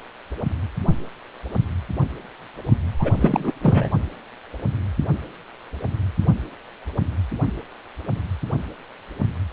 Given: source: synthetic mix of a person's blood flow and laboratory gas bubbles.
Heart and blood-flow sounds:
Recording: Doppler ultrasound of blood flow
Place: precordium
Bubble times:
2.99-3.12 s: bubbles
3.20-3.53 s: bubbles
3.62-3.89 s: bubbles
From the record:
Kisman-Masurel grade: 212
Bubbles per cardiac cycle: several, 3 to 8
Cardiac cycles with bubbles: 1 to 10%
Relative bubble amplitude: moderate (0.250 to 0.450)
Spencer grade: 1 (occasional bubble signal discernible with the cardiac motion signal, with majority of cardiac periods free of bubbles)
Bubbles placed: only in the low amplitude regions of the cardiac cycle

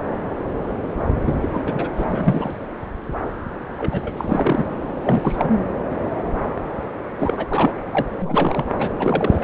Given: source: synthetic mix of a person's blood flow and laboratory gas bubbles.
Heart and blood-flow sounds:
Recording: Doppler ultrasound of blood flow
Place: subclavian vein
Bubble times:
1.25-1.34 s: bubbles
1.41-1.62 s: bubbles
1.66-1.88 s: bubbles
1.96-2.56 s: bubbles
3.78-4.65 s: bubbles
4.93-5.56 s: bubbles
7.19-7.80 s: bubbles
7.92-8.06 s: bubbles
8.21-8.65 s: bubbles
8.78-8.90 s: bubbles
8.99-9.44 s: bubbles
From the record:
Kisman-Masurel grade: 333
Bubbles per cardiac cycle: rolling drumbeat, 9 or more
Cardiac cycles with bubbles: 50 to 99%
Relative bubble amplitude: loud (0.450 to 0.775)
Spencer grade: 3 (all of the cardiac periods contain showers or single bubble signals, but not dominating or overriding the cardiac motion signals)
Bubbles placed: anywhere in the cardiac cycle

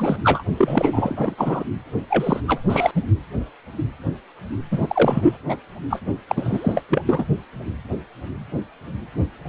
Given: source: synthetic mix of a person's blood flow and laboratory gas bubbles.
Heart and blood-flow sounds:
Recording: Doppler ultrasound of blood flow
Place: precordium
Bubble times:
0.00-0.17 s: bubbles
0.24-0.43 s: bubbles
0.58-1.35 s: bubbles
1.38-1.63 s: bubbles
2.10-2.41 s: bubbles
2.48-2.60 s: bubbles
2.68-2.91 s: bubbles
2.95-3.02 s: bubbles
4.71-5.38 s: bubbles
5.48-5.57 s: bubbles
5.90-6.00 s: bubbles
6.27-6.82 s: bubbles
6.89-7.02 s: bubbles
7.06-7.25 s: bubbles
From the record:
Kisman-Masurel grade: 332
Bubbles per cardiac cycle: rolling drumbeat, 9 or more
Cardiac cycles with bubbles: 50 to 99%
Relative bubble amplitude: moderate (0.250 to 0.450)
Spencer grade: 3 (all of the cardiac periods contain showers or single bubble signals, but not dominating or overriding the cardiac motion signals)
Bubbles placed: only in the low amplitude regions of the cardiac cycle

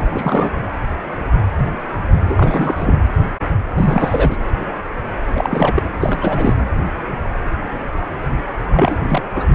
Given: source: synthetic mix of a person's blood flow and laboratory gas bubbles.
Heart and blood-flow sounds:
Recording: Doppler ultrasound of blood flow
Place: precordium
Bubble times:
0.00-0.06 s: bubbles
0.12-0.50 s: bubbles
2.29-2.99 s: bubbles
3.75-4.37 s: bubbles
5.34-5.83 s: bubbles
6.00-6.54 s: bubbles
8.71-8.96 s: bubbles
9.08-9.22 s: bubbles
9.35-9.46 s: bubbles
9.53-9.55 s: bubbles
From the record:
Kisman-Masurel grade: 332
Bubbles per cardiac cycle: rolling drumbeat, 9 or more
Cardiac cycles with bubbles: 50 to 99%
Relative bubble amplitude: moderate (0.250 to 0.450)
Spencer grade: 3 (all of the cardiac periods contain showers or single bubble signals, but not dominating or overriding the cardiac motion signals)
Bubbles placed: anywhere in the cardiac cycle

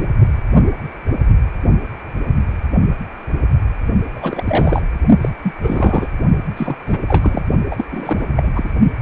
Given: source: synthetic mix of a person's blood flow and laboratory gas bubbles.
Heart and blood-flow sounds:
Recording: Doppler ultrasound of blood flow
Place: precordium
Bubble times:
4.13-4.82 s: bubbles
5.21-5.29 s: bubbles
5.43-5.54 s: bubbles
5.62-6.08 s: bubbles
6.57-6.76 s: bubbles
6.86-6.97 s: bubbles
7.08-7.42 s: bubbles
7.71-7.85 s: bubbles
7.90-8.27 s: bubbles
8.36-8.52 s: bubbles
8.55-8.70 s: bubbles
From the record:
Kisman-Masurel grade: 333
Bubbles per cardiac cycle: rolling drumbeat, 9 or more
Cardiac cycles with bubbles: 50 to 99%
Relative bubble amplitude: loud (0.450 to 0.775)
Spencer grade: 3 (all of the cardiac periods contain showers or single bubble signals, but not dominating or overriding the cardiac motion signals)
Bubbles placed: only in the low amplitude regions of the cardiac cycle

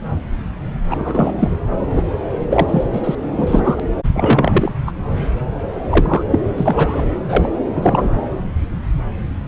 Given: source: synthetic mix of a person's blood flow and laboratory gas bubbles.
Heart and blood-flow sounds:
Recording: Doppler ultrasound of blood flow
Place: subclavian vein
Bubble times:
0.90-1.32 s: bubbles
1.39-1.49 s: bubbles
1.89-2.04 s: bubbles
2.50-2.84 s: bubbles
2.93-3.01 s: bubbles
3.04-3.15 s: bubbles
3.33-3.80 s: bubbles
4.13-4.71 s: bubbles
4.87-4.92 s: bubbles
5.91-6.22 s: bubbles
6.30-6.39 s: bubbles
6.57-7.08 s: bubbles
7.29-7.49 s: bubbles
7.75-8.11 s: bubbles
From the record:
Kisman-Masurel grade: 233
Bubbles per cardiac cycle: several, 3 to 8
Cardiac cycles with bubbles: 50 to 99%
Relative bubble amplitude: loud (0.450 to 0.775)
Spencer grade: 3 (all of the cardiac periods contain showers or single bubble signals, but not dominating or overriding the cardiac motion signals)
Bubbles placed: anywhere in the cardiac cycle

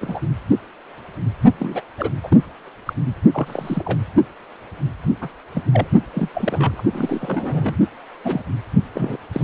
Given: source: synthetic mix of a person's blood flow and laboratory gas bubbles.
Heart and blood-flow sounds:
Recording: Doppler ultrasound of blood flow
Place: precordium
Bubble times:
0.01-0.20 s: bubbles
1.59-1.82 s: bubbles
1.98-2.11 s: bubbles
2.23-2.40 s: bubbles
2.85-2.93 s: bubbles
3.32-3.98 s: bubbles
5.21-5.28 s: bubbles
5.54-5.62 s: bubbles
5.73-5.87 s: bubbles
6.13-6.29 s: bubbles
6.34-6.82 s: bubbles
6.93-7.78 s: bubbles
8.23-8.42 s: bubbles
8.94-9.17 s: bubbles
9.33-9.43 s: bubbles
From the record:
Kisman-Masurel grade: 232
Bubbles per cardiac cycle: several, 3 to 8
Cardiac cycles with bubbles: 50 to 99%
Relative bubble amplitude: moderate (0.250 to 0.450)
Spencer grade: 3 (all of the cardiac periods contain showers or single bubble signals, but not dominating or overriding the cardiac motion signals)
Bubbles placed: only in the low amplitude regions of the cardiac cycle

